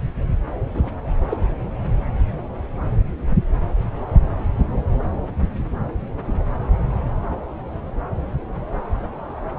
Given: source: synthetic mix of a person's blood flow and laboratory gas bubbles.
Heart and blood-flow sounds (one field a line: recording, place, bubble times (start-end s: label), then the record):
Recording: Doppler ultrasound of blood flow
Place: subclavian vein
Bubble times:
0.74-0.90 s: bubbles
1.30-1.37 s: bubbles
From the record:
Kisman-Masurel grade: 112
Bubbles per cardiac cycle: 1 to 2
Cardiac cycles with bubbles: 1 to 10%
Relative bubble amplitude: moderate (0.250 to 0.450)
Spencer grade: 1 (occasional bubble signal discernible with the cardiac motion signal, with majority of cardiac periods free of bubbles)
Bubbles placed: anywhere in the cardiac cycle